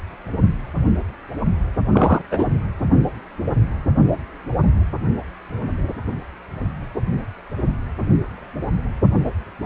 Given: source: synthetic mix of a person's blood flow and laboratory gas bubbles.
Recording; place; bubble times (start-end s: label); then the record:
Doppler ultrasound of blood flow; precordium
1.92-2.21 s: bubbles
2.31-2.45 s: bubbles
From the record:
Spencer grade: 1 (occasional bubble signal discernible with the cardiac motion signal, with majority of cardiac periods free of bubbles); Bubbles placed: anywhere in the cardiac cycle